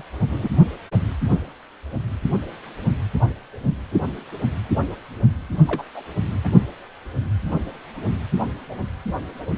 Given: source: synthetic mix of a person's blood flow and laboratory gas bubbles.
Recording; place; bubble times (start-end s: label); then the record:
Doppler ultrasound of blood flow; precordium
0.00-0.03 s: bubbles
0.30-0.51 s: bubbles
5.67-5.82 s: bubbles
5.95-6.02 s: bubbles
6.44-6.49 s: bubbles
From the record:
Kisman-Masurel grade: 221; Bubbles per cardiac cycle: several, 3 to 8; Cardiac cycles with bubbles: 10 to 50%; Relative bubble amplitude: barely perceptible (0.100 to 0.250); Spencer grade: 2 (many but less than half of the cardiac periods contain bubble signals, singularly or in groups); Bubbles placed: only in the low amplitude regions of the cardiac cycle